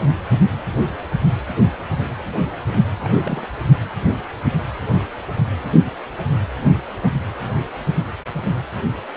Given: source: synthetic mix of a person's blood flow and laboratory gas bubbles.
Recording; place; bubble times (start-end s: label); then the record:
Doppler ultrasound of blood flow; precordium
2.96-3.48 s: bubbles
From the record:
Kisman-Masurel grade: 211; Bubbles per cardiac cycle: several, 3 to 8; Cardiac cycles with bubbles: 1 to 10%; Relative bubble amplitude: barely perceptible (0.100 to 0.250); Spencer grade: 1 (occasional bubble signal discernible with the cardiac motion signal, with majority of cardiac periods free of bubbles); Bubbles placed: anywhere in the cardiac cycle